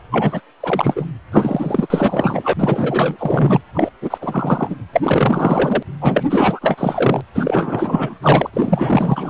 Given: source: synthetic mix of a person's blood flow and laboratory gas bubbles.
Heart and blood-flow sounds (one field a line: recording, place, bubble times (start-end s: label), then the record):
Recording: Doppler ultrasound of blood flow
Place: precordium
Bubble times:
0.11-0.41 s: bubbles
0.60-1.06 s: bubbles
1.31-1.88 s: bubbles
1.90-2.54 s: bubbles
2.58-3.61 s: bubbles
3.73-3.90 s: bubbles
4.01-4.18 s: bubbles
4.21-4.75 s: bubbles
4.92-5.83 s: bubbles
6.00-6.24 s: bubbles
6.29-7.21 s: bubbles
7.34-8.19 s: bubbles
8.21-8.50 s: bubbles
8.53-9.30 s: bubbles
From the record:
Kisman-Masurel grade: 444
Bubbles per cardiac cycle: continuous sound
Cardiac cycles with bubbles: 100%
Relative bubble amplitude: maximal (0.775 to 0.999)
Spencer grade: 4 (maximum detectable bubble signal sounding continuously throughout systole and diastole of every cardiac period, and overriding the amplitude of the normal cardiac signals)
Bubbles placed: anywhere in the cardiac cycle